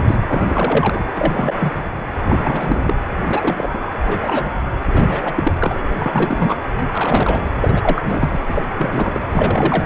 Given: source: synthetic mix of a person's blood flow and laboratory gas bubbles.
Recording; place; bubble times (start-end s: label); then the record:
Doppler ultrasound of blood flow; precordium
0.00-0.02 s: bubbles
0.07-0.19 s: bubbles
0.28-1.04 s: bubbles
1.16-1.74 s: bubbles
2.29-2.95 s: bubbles
3.29-4.47 s: bubbles
4.92-5.54 s: bubbles
5.60-5.84 s: bubbles
5.99-6.56 s: bubbles
6.77-6.83 s: bubbles
6.92-7.45 s: bubbles
7.60-8.38 s: bubbles
8.47-8.69 s: bubbles
8.78-9.21 s: bubbles
9.30-9.85 s: bubbles
From the record:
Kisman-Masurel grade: 342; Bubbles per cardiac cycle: rolling drumbeat, 9 or more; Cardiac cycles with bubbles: 100%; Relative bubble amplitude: moderate (0.250 to 0.450); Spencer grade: 3 (all of the cardiac periods contain showers or single bubble signals, but not dominating or overriding the cardiac motion signals); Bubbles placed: anywhere in the cardiac cycle